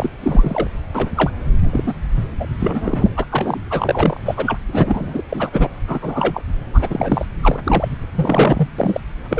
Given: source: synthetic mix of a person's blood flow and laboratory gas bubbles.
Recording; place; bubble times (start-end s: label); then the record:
Doppler ultrasound of blood flow; subclavian vein
0.00-0.10 s: bubbles
0.24-0.67 s: bubbles
0.94-1.11 s: bubbles
1.15-1.31 s: bubbles
1.61-1.94 s: bubbles
2.16-2.27 s: bubbles
2.40-2.48 s: bubbles
2.59-3.08 s: bubbles
3.17-3.25 s: bubbles
3.31-3.60 s: bubbles
3.70-4.18 s: bubbles
4.25-4.59 s: bubbles
4.72-5.21 s: bubbles
5.29-5.69 s: bubbles
5.88-6.43 s: bubbles
6.73-7.25 s: bubbles
7.41-7.60 s: bubbles
7.63-7.88 s: bubbles
8.14-8.69 s: bubbles
8.78-9.01 s: bubbles
9.29-9.40 s: bubbles
From the record:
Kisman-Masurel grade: 243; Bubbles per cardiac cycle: several, 3 to 8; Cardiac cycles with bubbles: 100%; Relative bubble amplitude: loud (0.450 to 0.775); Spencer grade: 3 (all of the cardiac periods contain showers or single bubble signals, but not dominating or overriding the cardiac motion signals); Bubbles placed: anywhere in the cardiac cycle